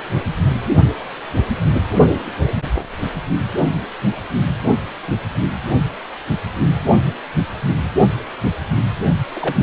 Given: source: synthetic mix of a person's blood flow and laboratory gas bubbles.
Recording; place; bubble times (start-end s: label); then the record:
Doppler ultrasound of blood flow; precordium
9.35-9.55 s: bubbles
9.59-9.63 s: bubbles
From the record:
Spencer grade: 1 (occasional bubble signal discernible with the cardiac motion signal, with majority of cardiac periods free of bubbles); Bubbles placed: only in the low amplitude regions of the cardiac cycle